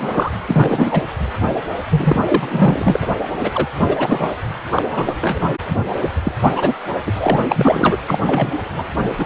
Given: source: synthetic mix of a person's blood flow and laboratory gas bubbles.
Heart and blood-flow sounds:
Doppler ultrasound of blood flow; precordium
0.00-0.32 s: bubbles
0.47-1.02 s: bubbles
1.90-3.09 s: bubbles
3.43-3.67 s: bubbles
3.88-4.34 s: bubbles
4.76-4.82 s: bubbles
4.95-5.52 s: bubbles
6.24-6.32 s: bubbles
6.48-6.74 s: bubbles
7.06-7.41 s: bubbles
7.47-7.97 s: bubbles
8.07-8.19 s: bubbles
8.26-8.53 s: bubbles
8.74-8.83 s: bubbles
9.18-9.26 s: bubbles
From the record:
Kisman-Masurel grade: 243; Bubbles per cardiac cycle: several, 3 to 8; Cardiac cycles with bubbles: 100%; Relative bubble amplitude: loud (0.450 to 0.775); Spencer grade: 3 (all of the cardiac periods contain showers or single bubble signals, but not dominating or overriding the cardiac motion signals); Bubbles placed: anywhere in the cardiac cycle

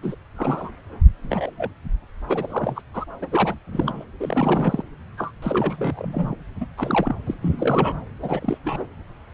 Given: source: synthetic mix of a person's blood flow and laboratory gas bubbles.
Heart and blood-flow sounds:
Doppler ultrasound of blood flow; subclavian vein
0.02-0.15 s: bubbles
0.36-0.69 s: bubbles
1.18-1.51 s: bubbles
1.58-1.73 s: bubbles
2.24-2.82 s: bubbles
2.94-3.05 s: bubbles
3.21-3.54 s: bubbles
3.72-4.04 s: bubbles
4.20-4.83 s: bubbles
5.17-5.31 s: bubbles
5.42-6.35 s: bubbles
6.60-6.66 s: bubbles
6.77-7.16 s: bubbles
7.26-7.34 s: bubbles
7.42-7.94 s: bubbles
8.22-8.58 s: bubbles
8.63-8.86 s: bubbles
From the record:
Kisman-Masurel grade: 242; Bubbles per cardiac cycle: several, 3 to 8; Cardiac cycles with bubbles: 100%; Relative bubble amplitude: moderate (0.250 to 0.450); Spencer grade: 3 (all of the cardiac periods contain showers or single bubble signals, but not dominating or overriding the cardiac motion signals); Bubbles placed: anywhere in the cardiac cycle

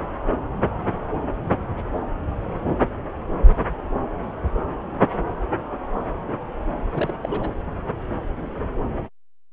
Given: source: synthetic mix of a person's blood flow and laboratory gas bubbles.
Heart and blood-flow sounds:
Doppler ultrasound of blood flow; subclavian vein
6.93-7.14 s: bubbles
7.21-7.56 s: bubbles
From the record:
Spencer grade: 1 (occasional bubble signal discernible with the cardiac motion signal, with majority of cardiac periods free of bubbles); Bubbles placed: anywhere in the cardiac cycle

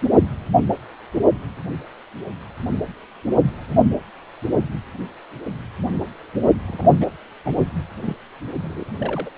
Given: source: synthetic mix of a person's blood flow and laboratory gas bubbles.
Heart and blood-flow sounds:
Doppler ultrasound of blood flow; precordium
6.67-6.92 s: bubbles
7.00-7.06 s: bubbles
7.45-7.55 s: bubbles
7.58-7.66 s: bubbles
8.02-8.15 s: bubbles
8.62-8.85 s: bubbles
9.00-9.30 s: bubbles
From the record:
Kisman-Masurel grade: 221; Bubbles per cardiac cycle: several, 3 to 8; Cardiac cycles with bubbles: 10 to 50%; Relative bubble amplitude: barely perceptible (0.100 to 0.250); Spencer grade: 2 (many but less than half of the cardiac periods contain bubble signals, singularly or in groups); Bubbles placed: only in the low amplitude regions of the cardiac cycle

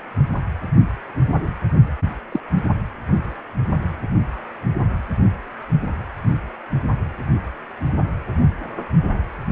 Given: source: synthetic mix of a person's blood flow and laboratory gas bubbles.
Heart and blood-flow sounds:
Doppler ultrasound of blood flow; precordium
2.31-2.40 s: bubbles
From the record:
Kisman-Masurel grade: 112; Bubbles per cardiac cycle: 1 to 2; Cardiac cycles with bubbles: 1 to 10%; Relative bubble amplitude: moderate (0.250 to 0.450); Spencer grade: 1 (occasional bubble signal discernible with the cardiac motion signal, with majority of cardiac periods free of bubbles); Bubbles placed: only in the low amplitude regions of the cardiac cycle

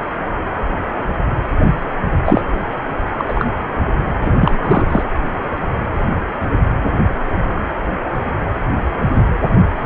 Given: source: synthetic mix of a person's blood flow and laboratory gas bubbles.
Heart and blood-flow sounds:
Doppler ultrasound of blood flow; precordium
2.25-2.41 s: bubbles
3.18-3.25 s: bubbles
3.28-3.46 s: bubbles
4.21-4.31 s: bubbles
4.39-4.58 s: bubbles
4.61-4.87 s: bubbles
4.90-5.03 s: bubbles
From the record:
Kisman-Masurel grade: 223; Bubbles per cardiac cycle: several, 3 to 8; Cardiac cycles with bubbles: 10 to 50%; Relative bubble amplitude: loud (0.450 to 0.775); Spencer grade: 2 (many but less than half of the cardiac periods contain bubble signals, singularly or in groups); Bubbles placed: anywhere in the cardiac cycle

